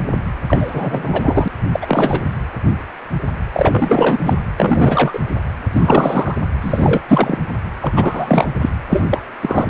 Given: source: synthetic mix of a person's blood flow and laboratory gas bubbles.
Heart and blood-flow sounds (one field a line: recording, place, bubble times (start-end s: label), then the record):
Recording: Doppler ultrasound of blood flow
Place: precordium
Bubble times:
0.47-1.48 s: bubbles
1.73-2.23 s: bubbles
3.54-4.19 s: bubbles
4.23-4.37 s: bubbles
4.57-5.20 s: bubbles
5.72-6.36 s: bubbles
6.61-7.02 s: bubbles
7.08-7.39 s: bubbles
7.81-8.48 s: bubbles
8.62-8.70 s: bubbles
8.90-9.04 s: bubbles
9.10-9.22 s: bubbles
9.41-9.67 s: bubbles
From the record:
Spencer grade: 3 (all of the cardiac periods contain showers or single bubble signals, but not dominating or overriding the cardiac motion signals)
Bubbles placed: anywhere in the cardiac cycle